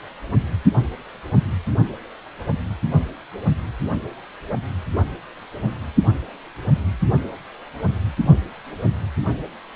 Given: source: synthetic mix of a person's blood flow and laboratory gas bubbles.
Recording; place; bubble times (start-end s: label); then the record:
Doppler ultrasound of blood flow; precordium
no bubbles
From the record:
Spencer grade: 0 (complete lack of bubble signals)